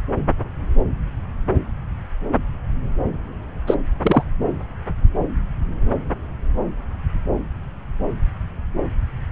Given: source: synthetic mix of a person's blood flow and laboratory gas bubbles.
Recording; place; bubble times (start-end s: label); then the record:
Doppler ultrasound of blood flow; subclavian vein
3.67-3.75 s: bubbles
4.02-4.23 s: bubbles
From the record:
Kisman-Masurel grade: 223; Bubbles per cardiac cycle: several, 3 to 8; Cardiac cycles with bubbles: 10 to 50%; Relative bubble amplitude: loud (0.450 to 0.775); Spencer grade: 2 (many but less than half of the cardiac periods contain bubble signals, singularly or in groups); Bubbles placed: anywhere in the cardiac cycle